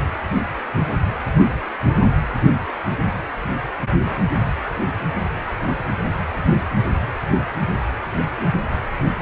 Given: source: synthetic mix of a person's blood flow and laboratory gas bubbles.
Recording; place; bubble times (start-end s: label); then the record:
Doppler ultrasound of blood flow; precordium
no bubbles
From the record:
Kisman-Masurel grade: 000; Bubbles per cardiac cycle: 0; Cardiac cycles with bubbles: 0%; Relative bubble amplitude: no bubbles discernible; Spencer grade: 0 (complete lack of bubble signals)